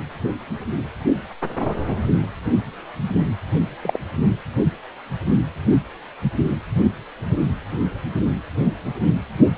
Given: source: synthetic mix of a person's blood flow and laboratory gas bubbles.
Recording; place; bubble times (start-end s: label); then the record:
Doppler ultrasound of blood flow; precordium
3.82-3.97 s: bubbles
From the record:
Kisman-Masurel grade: 113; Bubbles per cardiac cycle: 1 to 2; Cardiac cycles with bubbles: 1 to 10%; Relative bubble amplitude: loud (0.450 to 0.775); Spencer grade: 1 (occasional bubble signal discernible with the cardiac motion signal, with majority of cardiac periods free of bubbles); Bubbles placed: only in the low amplitude regions of the cardiac cycle